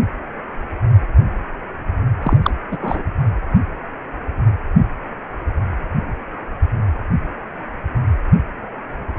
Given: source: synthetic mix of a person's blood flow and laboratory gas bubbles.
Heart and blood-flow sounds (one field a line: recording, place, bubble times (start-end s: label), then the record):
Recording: Doppler ultrasound of blood flow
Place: precordium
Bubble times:
2.23-2.37 s: bubbles
2.43-2.50 s: bubbles
2.71-2.77 s: bubbles
2.81-3.02 s: bubbles
From the record:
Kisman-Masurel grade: 213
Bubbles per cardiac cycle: several, 3 to 8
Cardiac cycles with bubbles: 1 to 10%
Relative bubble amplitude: loud (0.450 to 0.775)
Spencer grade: 1 (occasional bubble signal discernible with the cardiac motion signal, with majority of cardiac periods free of bubbles)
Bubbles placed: anywhere in the cardiac cycle